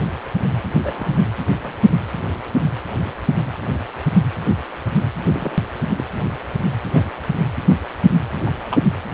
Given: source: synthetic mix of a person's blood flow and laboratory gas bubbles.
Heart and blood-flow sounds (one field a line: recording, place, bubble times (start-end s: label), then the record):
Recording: Doppler ultrasound of blood flow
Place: precordium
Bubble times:
0.84-1.18 s: bubbles
1.64-1.73 s: bubbles
5.33-5.58 s: bubbles
5.97-6.05 s: bubbles
6.93-7.02 s: bubbles
8.46-8.51 s: bubbles
8.71-8.78 s: bubbles
From the record:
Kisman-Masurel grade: 121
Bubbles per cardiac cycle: 1 to 2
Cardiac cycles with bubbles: 10 to 50%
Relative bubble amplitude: barely perceptible (0.100 to 0.250)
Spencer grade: 2 (many but less than half of the cardiac periods contain bubble signals, singularly or in groups)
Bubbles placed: anywhere in the cardiac cycle